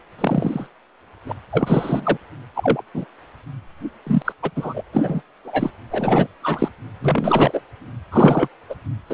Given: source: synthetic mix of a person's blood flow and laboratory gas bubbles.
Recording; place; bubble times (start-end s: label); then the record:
Doppler ultrasound of blood flow; precordium
0.18-0.67 s: bubbles
1.26-1.32 s: bubbles
1.52-2.17 s: bubbles
2.55-2.82 s: bubbles
2.94-3.05 s: bubbles
4.06-4.22 s: bubbles
4.25-4.33 s: bubbles
4.42-4.50 s: bubbles
4.55-4.83 s: bubbles
4.92-5.21 s: bubbles
5.44-5.71 s: bubbles
5.91-6.26 s: bubbles
6.41-6.69 s: bubbles
7.01-7.60 s: bubbles
8.11-8.48 s: bubbles
8.69-8.75 s: bubbles
9.10-9.14 s: bubbles
From the record:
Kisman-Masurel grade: 243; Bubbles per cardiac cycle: several, 3 to 8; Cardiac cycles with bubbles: 100%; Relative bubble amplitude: loud (0.450 to 0.775); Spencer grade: 3 (all of the cardiac periods contain showers or single bubble signals, but not dominating or overriding the cardiac motion signals); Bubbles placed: anywhere in the cardiac cycle